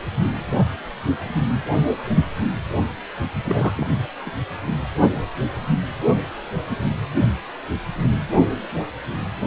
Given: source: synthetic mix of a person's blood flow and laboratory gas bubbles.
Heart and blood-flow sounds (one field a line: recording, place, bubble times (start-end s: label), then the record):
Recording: Doppler ultrasound of blood flow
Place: precordium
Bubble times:
3.45-3.72 s: bubbles
3.75-4.01 s: bubbles
4.26-4.31 s: bubbles
From the record:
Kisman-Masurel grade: 211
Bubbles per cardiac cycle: several, 3 to 8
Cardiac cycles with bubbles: 1 to 10%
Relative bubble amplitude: barely perceptible (0.100 to 0.250)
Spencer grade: 1 (occasional bubble signal discernible with the cardiac motion signal, with majority of cardiac periods free of bubbles)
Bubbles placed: only in the low amplitude regions of the cardiac cycle